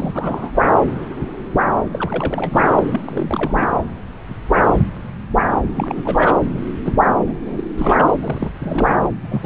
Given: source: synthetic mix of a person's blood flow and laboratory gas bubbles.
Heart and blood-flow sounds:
Doppler ultrasound of blood flow; subclavian vein
0.00-0.51 s: bubbles
1.91-2.73 s: bubbles
2.77-2.83 s: bubbles
2.87-3.01 s: bubbles
3.07-3.81 s: bubbles
5.76-6.02 s: bubbles
6.04-6.35 s: bubbles
6.84-6.96 s: bubbles
7.27-7.33 s: bubbles
7.45-7.64 s: bubbles
7.78-8.05 s: bubbles
8.08-8.12 s: bubbles
8.18-8.52 s: bubbles
8.60-9.07 s: bubbles
9.22-9.46 s: bubbles
From the record:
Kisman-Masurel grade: 332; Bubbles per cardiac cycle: rolling drumbeat, 9 or more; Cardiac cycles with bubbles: 50 to 99%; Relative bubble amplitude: moderate (0.250 to 0.450); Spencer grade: 3 (all of the cardiac periods contain showers or single bubble signals, but not dominating or overriding the cardiac motion signals); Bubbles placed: anywhere in the cardiac cycle

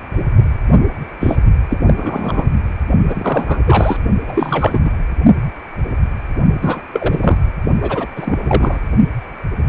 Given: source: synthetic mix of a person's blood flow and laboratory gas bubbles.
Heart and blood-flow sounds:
Doppler ultrasound of blood flow; precordium
1.20-1.36 s: bubbles
1.70-1.79 s: bubbles
1.85-2.45 s: bubbles
3.08-3.61 s: bubbles
3.65-4.00 s: bubbles
4.27-4.79 s: bubbles
4.84-4.91 s: bubbles
6.61-6.82 s: bubbles
6.92-7.38 s: bubbles
7.81-8.06 s: bubbles
8.16-8.78 s: bubbles
From the record:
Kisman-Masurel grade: 333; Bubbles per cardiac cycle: rolling drumbeat, 9 or more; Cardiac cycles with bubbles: 50 to 99%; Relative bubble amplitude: loud (0.450 to 0.775); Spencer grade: 3 (all of the cardiac periods contain showers or single bubble signals, but not dominating or overriding the cardiac motion signals); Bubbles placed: only in the low amplitude regions of the cardiac cycle

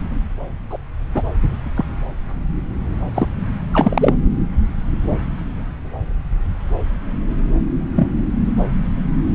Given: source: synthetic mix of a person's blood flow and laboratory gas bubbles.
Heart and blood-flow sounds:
Doppler ultrasound of blood flow; subclavian vein
0.70-0.79 s: bubbles
1.14-1.23 s: bubbles
1.76-1.84 s: bubbles
3.14-3.28 s: bubbles
3.73-4.14 s: bubbles
7.95-8.08 s: bubbles
From the record:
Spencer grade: 2 (many but less than half of the cardiac periods contain bubble signals, singularly or in groups); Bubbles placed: anywhere in the cardiac cycle

